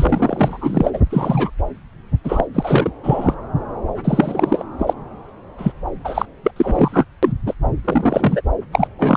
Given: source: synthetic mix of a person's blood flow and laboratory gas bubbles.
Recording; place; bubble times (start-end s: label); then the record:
Doppler ultrasound of blood flow; subclavian vein
0.00-1.01 s: bubbles
1.06-1.50 s: bubbles
2.24-2.47 s: bubbles
2.54-2.90 s: bubbles
3.03-3.34 s: bubbles
4.04-4.64 s: bubbles
4.79-4.94 s: bubbles
5.58-5.72 s: bubbles
6.04-6.25 s: bubbles
6.43-6.51 s: bubbles
6.56-7.04 s: bubbles
7.23-7.33 s: bubbles
7.46-7.54 s: bubbles
7.84-8.41 s: bubbles
8.72-8.88 s: bubbles
8.98-9.17 s: bubbles
From the record:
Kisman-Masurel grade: 233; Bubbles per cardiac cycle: several, 3 to 8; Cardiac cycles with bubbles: 50 to 99%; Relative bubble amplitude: loud (0.450 to 0.775); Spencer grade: 3 (all of the cardiac periods contain showers or single bubble signals, but not dominating or overriding the cardiac motion signals); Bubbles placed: anywhere in the cardiac cycle